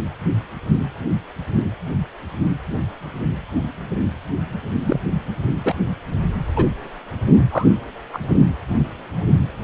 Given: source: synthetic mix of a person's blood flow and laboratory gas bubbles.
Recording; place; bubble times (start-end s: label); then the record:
Doppler ultrasound of blood flow; precordium
4.84-5.00 s: bubbles
5.63-5.74 s: bubbles
6.55-6.65 s: bubbles
7.50-7.66 s: bubbles
8.12-8.18 s: bubbles
From the record:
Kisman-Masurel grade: 123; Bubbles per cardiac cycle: 1 to 2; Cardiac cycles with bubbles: 10 to 50%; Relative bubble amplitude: loud (0.450 to 0.775); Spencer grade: 2 (many but less than half of the cardiac periods contain bubble signals, singularly or in groups); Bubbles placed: only in the low amplitude regions of the cardiac cycle